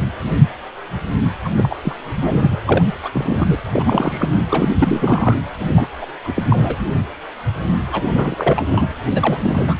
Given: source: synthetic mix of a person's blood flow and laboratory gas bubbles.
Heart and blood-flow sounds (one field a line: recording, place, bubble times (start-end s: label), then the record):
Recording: Doppler ultrasound of blood flow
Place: precordium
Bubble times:
1.44-1.49 s: bubbles
1.55-1.76 s: bubbles
1.82-1.94 s: bubbles
2.04-2.58 s: bubbles
2.65-2.93 s: bubbles
3.02-3.09 s: bubbles
3.12-3.56 s: bubbles
3.71-4.30 s: bubbles
4.49-4.71 s: bubbles
4.79-5.34 s: bubbles
5.61-5.65 s: bubbles
5.76-5.88 s: bubbles
6.01-6.06 s: bubbles
6.24-6.43 s: bubbles
6.49-6.77 s: bubbles
7.92-8.03 s: bubbles
8.07-8.62 s: bubbles
8.66-8.88 s: bubbles
9.14-9.75 s: bubbles
From the record:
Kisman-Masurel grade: 332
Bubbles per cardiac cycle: rolling drumbeat, 9 or more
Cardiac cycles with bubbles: 50 to 99%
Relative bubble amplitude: moderate (0.250 to 0.450)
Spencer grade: 3 (all of the cardiac periods contain showers or single bubble signals, but not dominating or overriding the cardiac motion signals)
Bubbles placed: anywhere in the cardiac cycle